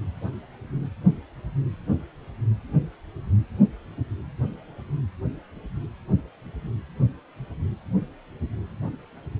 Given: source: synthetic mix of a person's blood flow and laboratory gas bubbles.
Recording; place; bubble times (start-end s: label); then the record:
Doppler ultrasound of blood flow; precordium
no bubbles
From the record:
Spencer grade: 0 (complete lack of bubble signals)